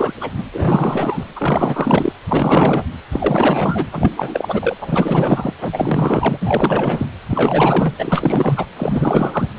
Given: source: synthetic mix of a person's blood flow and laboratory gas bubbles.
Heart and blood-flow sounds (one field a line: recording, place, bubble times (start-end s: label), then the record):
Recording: Doppler ultrasound of blood flow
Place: precordium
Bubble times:
0.00-0.14 s: bubbles
0.20-0.30 s: bubbles
0.36-0.44 s: bubbles
0.53-1.25 s: bubbles
1.36-2.12 s: bubbles
2.27-2.84 s: bubbles
3.11-3.87 s: bubbles
3.92-4.11 s: bubbles
4.16-4.74 s: bubbles
4.80-5.54 s: bubbles
5.62-6.38 s: bubbles
6.41-7.06 s: bubbles
7.27-7.94 s: bubbles
7.98-8.66 s: bubbles
8.77-9.49 s: bubbles
9.56-9.59 s: bubbles
From the record:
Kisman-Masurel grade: 444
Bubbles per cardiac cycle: continuous sound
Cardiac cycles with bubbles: 100%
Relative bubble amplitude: maximal (0.775 to 0.999)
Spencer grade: 4 (maximum detectable bubble signal sounding continuously throughout systole and diastole of every cardiac period, and overriding the amplitude of the normal cardiac signals)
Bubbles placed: anywhere in the cardiac cycle